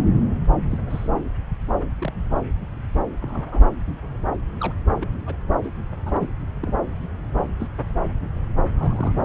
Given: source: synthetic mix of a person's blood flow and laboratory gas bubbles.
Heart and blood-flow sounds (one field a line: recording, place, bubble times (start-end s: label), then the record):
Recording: Doppler ultrasound of blood flow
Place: subclavian vein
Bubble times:
0.71-0.78 s: bubbles
0.89-1.09 s: bubbles
2.00-2.12 s: bubbles
3.22-3.62 s: bubbles
4.60-4.73 s: bubbles
5.00-5.08 s: bubbles
5.27-5.34 s: bubbles
5.63-5.71 s: bubbles
6.05-6.27 s: bubbles
6.61-6.74 s: bubbles
7.59-7.67 s: bubbles
8.78-9.12 s: bubbles
From the record:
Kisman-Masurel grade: 121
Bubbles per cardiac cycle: 1 to 2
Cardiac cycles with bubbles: 10 to 50%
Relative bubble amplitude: barely perceptible (0.100 to 0.250)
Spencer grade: 2 (many but less than half of the cardiac periods contain bubble signals, singularly or in groups)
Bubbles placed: anywhere in the cardiac cycle